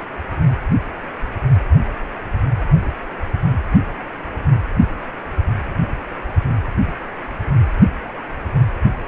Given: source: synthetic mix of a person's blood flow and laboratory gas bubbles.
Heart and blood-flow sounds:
Doppler ultrasound of blood flow; precordium
no bubbles
From the record:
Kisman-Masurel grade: 000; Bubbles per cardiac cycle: 0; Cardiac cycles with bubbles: 0%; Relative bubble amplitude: no bubbles discernible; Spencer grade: 0 (complete lack of bubble signals)

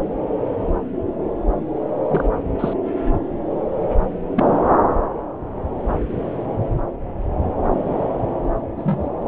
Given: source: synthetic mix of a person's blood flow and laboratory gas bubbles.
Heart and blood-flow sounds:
Doppler ultrasound of blood flow; subclavian vein
2.08-2.29 s: bubbles
2.59-2.73 s: bubbles
4.36-4.44 s: bubbles
8.77-9.10 s: bubbles
From the record:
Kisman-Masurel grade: 122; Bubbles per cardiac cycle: 1 to 2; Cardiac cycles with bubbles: 10 to 50%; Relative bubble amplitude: moderate (0.250 to 0.450); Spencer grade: 2 (many but less than half of the cardiac periods contain bubble signals, singularly or in groups); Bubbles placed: anywhere in the cardiac cycle

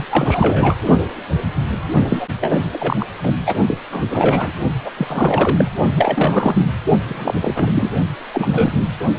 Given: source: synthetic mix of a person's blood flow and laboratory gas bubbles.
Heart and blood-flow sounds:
Doppler ultrasound of blood flow; precordium
0.00-0.04 s: bubbles
0.08-0.75 s: bubbles
2.08-2.27 s: bubbles
2.41-2.58 s: bubbles
2.73-2.96 s: bubbles
3.00-3.06 s: bubbles
3.23-3.33 s: bubbles
3.46-3.56 s: bubbles
3.67-3.78 s: bubbles
3.91-4.52 s: bubbles
4.84-4.92 s: bubbles
4.97-5.67 s: bubbles
5.96-6.71 s: bubbles
7.08-7.34 s: bubbles
7.42-7.90 s: bubbles
8.33-8.71 s: bubbles
From the record:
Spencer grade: 3 (all of the cardiac periods contain showers or single bubble signals, but not dominating or overriding the cardiac motion signals); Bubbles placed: only in the low amplitude regions of the cardiac cycle

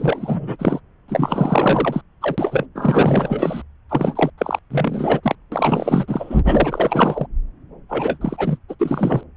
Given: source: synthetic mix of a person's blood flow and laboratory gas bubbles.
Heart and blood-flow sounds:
Doppler ultrasound of blood flow; subclavian vein
0.00-0.56 s: bubbles
0.59-0.80 s: bubbles
1.08-2.01 s: bubbles
2.21-2.66 s: bubbles
2.74-3.62 s: bubbles
3.89-4.30 s: bubbles
4.38-4.59 s: bubbles
4.71-5.21 s: bubbles
5.23-5.36 s: bubbles
5.52-6.40 s: bubbles
6.44-7.27 s: bubbles
7.89-8.57 s: bubbles
8.69-8.75 s: bubbles
8.79-9.23 s: bubbles
From the record:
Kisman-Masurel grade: 444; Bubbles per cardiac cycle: continuous sound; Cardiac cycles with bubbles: 100%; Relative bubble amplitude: maximal (0.775 to 0.999); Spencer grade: 4 (maximum detectable bubble signal sounding continuously throughout systole and diastole of every cardiac period, and overriding the amplitude of the normal cardiac signals); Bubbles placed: anywhere in the cardiac cycle

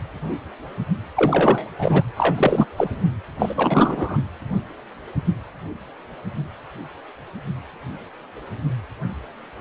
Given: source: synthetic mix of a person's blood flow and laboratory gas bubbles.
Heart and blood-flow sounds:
Doppler ultrasound of blood flow; precordium
1.16-1.66 s: bubbles
1.78-2.04 s: bubbles
2.16-2.66 s: bubbles
2.77-2.89 s: bubbles
3.38-4.18 s: bubbles
From the record:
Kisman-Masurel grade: 333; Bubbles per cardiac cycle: rolling drumbeat, 9 or more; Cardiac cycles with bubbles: 50 to 99%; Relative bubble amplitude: loud (0.450 to 0.775); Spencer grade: 3 (all of the cardiac periods contain showers or single bubble signals, but not dominating or overriding the cardiac motion signals); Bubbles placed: anywhere in the cardiac cycle

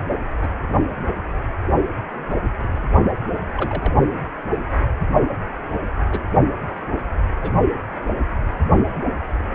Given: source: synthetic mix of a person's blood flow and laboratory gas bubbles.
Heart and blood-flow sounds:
Doppler ultrasound of blood flow; precordium
0.41-0.48 s: bubbles
3.57-3.94 s: bubbles
6.10-6.20 s: bubbles
7.42-7.50 s: bubbles
From the record:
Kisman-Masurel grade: 121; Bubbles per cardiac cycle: 1 to 2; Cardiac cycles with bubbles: 10 to 50%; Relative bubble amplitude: barely perceptible (0.100 to 0.250); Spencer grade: 2 (many but less than half of the cardiac periods contain bubble signals, singularly or in groups); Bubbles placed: only in the low amplitude regions of the cardiac cycle

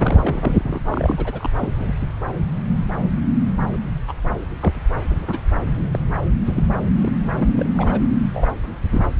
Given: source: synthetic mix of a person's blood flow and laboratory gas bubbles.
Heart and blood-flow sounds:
Doppler ultrasound of blood flow; subclavian vein
0.00-0.81 s: bubbles
0.91-1.50 s: bubbles
1.59-1.72 s: bubbles
1.75-1.94 s: bubbles
4.07-4.13 s: bubbles
4.60-4.82 s: bubbles
5.09-5.38 s: bubbles
5.93-5.99 s: bubbles
6.46-6.63 s: bubbles
6.96-7.10 s: bubbles
7.32-8.07 s: bubbles
8.34-8.48 s: bubbles
8.93-9.02 s: bubbles
From the record:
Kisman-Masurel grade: 232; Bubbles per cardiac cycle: several, 3 to 8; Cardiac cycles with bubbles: 50 to 99%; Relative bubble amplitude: moderate (0.250 to 0.450); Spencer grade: 3 (all of the cardiac periods contain showers or single bubble signals, but not dominating or overriding the cardiac motion signals); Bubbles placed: anywhere in the cardiac cycle

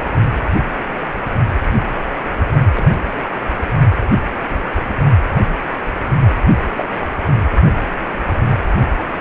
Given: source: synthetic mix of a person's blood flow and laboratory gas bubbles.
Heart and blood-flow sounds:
Doppler ultrasound of blood flow; precordium
2.74-3.20 s: bubbles
3.23-3.29 s: bubbles
6.75-6.85 s: bubbles
6.90-7.01 s: bubbles
From the record:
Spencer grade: 2 (many but less than half of the cardiac periods contain bubble signals, singularly or in groups); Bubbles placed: only in the low amplitude regions of the cardiac cycle

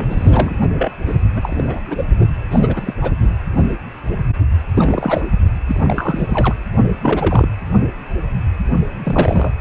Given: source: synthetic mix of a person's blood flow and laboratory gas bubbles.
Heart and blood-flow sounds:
Doppler ultrasound of blood flow; precordium
0.00-0.58 s: bubbles
0.78-0.92 s: bubbles
1.06-1.16 s: bubbles
1.35-1.80 s: bubbles
1.87-2.03 s: bubbles
2.50-2.94 s: bubbles
3.02-3.12 s: bubbles
4.74-5.25 s: bubbles
5.67-6.55 s: bubbles
7.03-7.49 s: bubbles
9.03-9.51 s: bubbles
From the record:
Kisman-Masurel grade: 332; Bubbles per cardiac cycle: rolling drumbeat, 9 or more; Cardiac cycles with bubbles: 50 to 99%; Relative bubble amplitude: moderate (0.250 to 0.450); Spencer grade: 3 (all of the cardiac periods contain showers or single bubble signals, but not dominating or overriding the cardiac motion signals); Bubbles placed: only in the low amplitude regions of the cardiac cycle

